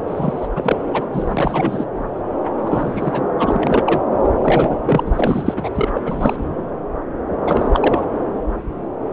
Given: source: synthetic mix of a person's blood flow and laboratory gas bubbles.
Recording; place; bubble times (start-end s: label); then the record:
Doppler ultrasound of blood flow; subclavian vein
0.07-0.48 s: bubbles
0.55-0.76 s: bubbles
0.93-1.05 s: bubbles
1.12-1.85 s: bubbles
2.62-3.23 s: bubbles
3.38-4.00 s: bubbles
4.24-4.28 s: bubbles
4.43-4.77 s: bubbles
4.86-5.69 s: bubbles
5.75-5.89 s: bubbles
5.94-6.02 s: bubbles
6.05-6.36 s: bubbles
7.46-8.05 s: bubbles
From the record:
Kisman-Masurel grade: 333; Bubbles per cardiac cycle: rolling drumbeat, 9 or more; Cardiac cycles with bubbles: 50 to 99%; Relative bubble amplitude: loud (0.450 to 0.775); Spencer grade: 3 (all of the cardiac periods contain showers or single bubble signals, but not dominating or overriding the cardiac motion signals); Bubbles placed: anywhere in the cardiac cycle